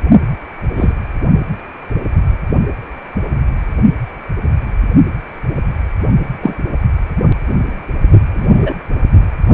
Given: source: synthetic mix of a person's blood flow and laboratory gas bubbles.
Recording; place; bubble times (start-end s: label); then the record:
Doppler ultrasound of blood flow; precordium
0.77-0.93 s: bubbles
6.42-6.54 s: bubbles
8.33-8.74 s: bubbles
From the record:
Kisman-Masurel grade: 123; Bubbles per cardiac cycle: 1 to 2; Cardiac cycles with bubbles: 10 to 50%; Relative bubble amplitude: loud (0.450 to 0.775); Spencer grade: 2 (many but less than half of the cardiac periods contain bubble signals, singularly or in groups); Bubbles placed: only in the low amplitude regions of the cardiac cycle